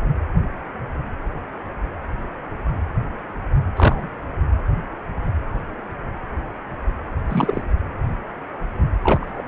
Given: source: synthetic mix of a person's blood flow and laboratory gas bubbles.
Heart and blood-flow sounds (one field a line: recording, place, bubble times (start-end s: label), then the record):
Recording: Doppler ultrasound of blood flow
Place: precordium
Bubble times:
3.76-4.08 s: bubbles
7.28-7.63 s: bubbles
9.03-9.43 s: bubbles
From the record:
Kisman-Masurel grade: 223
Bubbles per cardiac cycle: several, 3 to 8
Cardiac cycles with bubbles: 10 to 50%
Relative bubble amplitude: loud (0.450 to 0.775)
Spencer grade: 2 (many but less than half of the cardiac periods contain bubble signals, singularly or in groups)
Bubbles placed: anywhere in the cardiac cycle